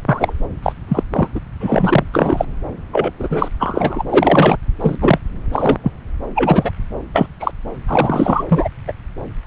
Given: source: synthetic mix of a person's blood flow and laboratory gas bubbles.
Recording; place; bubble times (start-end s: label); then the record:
Doppler ultrasound of blood flow; subclavian vein
0.08-0.33 s: bubbles
0.62-0.72 s: bubbles
0.88-1.03 s: bubbles
1.14-1.29 s: bubbles
1.35-1.40 s: bubbles
1.60-2.03 s: bubbles
2.13-2.45 s: bubbles
2.92-3.11 s: bubbles
3.19-3.48 s: bubbles
3.59-4.04 s: bubbles
4.12-4.56 s: bubbles
4.81-4.96 s: bubbles
5.00-5.19 s: bubbles
5.53-5.79 s: bubbles
5.83-5.92 s: bubbles
6.35-6.71 s: bubbles
7.13-7.27 s: bubbles
7.40-7.52 s: bubbles
7.88-8.43 s: bubbles
8.49-8.68 s: bubbles
8.87-8.93 s: bubbles
From the record:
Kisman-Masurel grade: 243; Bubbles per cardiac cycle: several, 3 to 8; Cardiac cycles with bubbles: 100%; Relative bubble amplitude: loud (0.450 to 0.775); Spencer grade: 3 (all of the cardiac periods contain showers or single bubble signals, but not dominating or overriding the cardiac motion signals); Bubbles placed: anywhere in the cardiac cycle